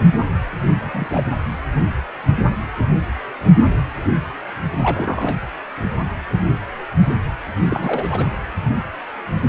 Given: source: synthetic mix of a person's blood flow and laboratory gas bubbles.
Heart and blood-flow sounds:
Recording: Doppler ultrasound of blood flow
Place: precordium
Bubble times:
0.80-1.07 s: bubbles
1.10-1.26 s: bubbles
4.78-5.37 s: bubbles
7.69-8.29 s: bubbles
From the record:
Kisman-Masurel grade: 222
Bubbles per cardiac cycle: several, 3 to 8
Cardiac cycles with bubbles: 10 to 50%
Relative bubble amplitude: moderate (0.250 to 0.450)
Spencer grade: 2 (many but less than half of the cardiac periods contain bubble signals, singularly or in groups)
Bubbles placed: anywhere in the cardiac cycle

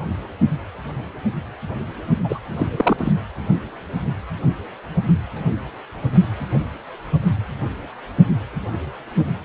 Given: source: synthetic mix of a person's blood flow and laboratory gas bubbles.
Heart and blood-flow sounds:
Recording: Doppler ultrasound of blood flow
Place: precordium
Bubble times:
2.23-2.38 s: bubbles
2.56-2.67 s: bubbles
2.76-3.12 s: bubbles
From the record:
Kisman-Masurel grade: 212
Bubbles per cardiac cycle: several, 3 to 8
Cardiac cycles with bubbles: 1 to 10%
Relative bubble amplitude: moderate (0.250 to 0.450)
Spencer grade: 1 (occasional bubble signal discernible with the cardiac motion signal, with majority of cardiac periods free of bubbles)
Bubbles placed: anywhere in the cardiac cycle

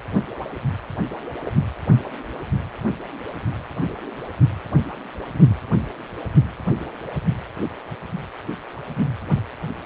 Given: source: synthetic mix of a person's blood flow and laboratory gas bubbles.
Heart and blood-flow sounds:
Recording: Doppler ultrasound of blood flow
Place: precordium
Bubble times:
1.45-1.50 s: bubbles
1.87-2.02 s: bubbles
From the record:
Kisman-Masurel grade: 113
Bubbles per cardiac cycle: 1 to 2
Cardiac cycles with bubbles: 1 to 10%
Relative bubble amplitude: loud (0.450 to 0.775)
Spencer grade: 1 (occasional bubble signal discernible with the cardiac motion signal, with majority of cardiac periods free of bubbles)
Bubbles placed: anywhere in the cardiac cycle

